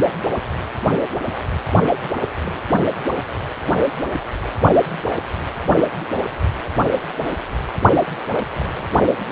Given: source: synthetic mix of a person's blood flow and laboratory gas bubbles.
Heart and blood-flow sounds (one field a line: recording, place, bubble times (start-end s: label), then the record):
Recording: Doppler ultrasound of blood flow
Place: precordium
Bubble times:
0.02-0.09 s: bubbles
1.83-1.95 s: bubbles
2.01-2.11 s: bubbles
2.44-2.62 s: bubbles
8.00-8.20 s: bubbles
8.29-8.44 s: bubbles
8.60-8.65 s: bubbles
8.77-8.88 s: bubbles
9.19-9.25 s: bubbles
From the record:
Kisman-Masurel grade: 221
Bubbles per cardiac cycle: several, 3 to 8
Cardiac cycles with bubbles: 10 to 50%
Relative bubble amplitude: barely perceptible (0.100 to 0.250)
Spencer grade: 2 (many but less than half of the cardiac periods contain bubble signals, singularly or in groups)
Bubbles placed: only in the low amplitude regions of the cardiac cycle